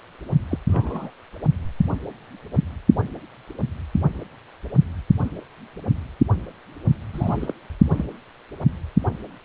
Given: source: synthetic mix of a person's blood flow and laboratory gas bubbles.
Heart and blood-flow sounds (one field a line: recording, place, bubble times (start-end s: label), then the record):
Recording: Doppler ultrasound of blood flow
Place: precordium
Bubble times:
0.50-0.58 s: bubbles
0.68-1.10 s: bubbles
7.13-7.54 s: bubbles
7.92-8.05 s: bubbles
From the record:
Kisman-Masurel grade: 121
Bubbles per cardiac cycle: 1 to 2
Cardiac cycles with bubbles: 10 to 50%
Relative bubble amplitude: barely perceptible (0.100 to 0.250)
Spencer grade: 2 (many but less than half of the cardiac periods contain bubble signals, singularly or in groups)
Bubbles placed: only in the low amplitude regions of the cardiac cycle